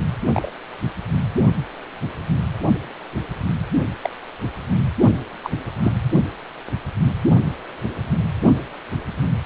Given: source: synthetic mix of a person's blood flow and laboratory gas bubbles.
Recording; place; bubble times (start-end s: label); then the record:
Doppler ultrasound of blood flow; precordium
0.32-0.53 s: bubbles
4.02-4.10 s: bubbles
5.44-5.50 s: bubbles
5.83-5.93 s: bubbles
From the record:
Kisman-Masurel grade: 122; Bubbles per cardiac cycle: 1 to 2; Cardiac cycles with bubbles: 10 to 50%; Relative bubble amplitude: moderate (0.250 to 0.450); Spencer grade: 2 (many but less than half of the cardiac periods contain bubble signals, singularly or in groups); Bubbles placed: only in the low amplitude regions of the cardiac cycle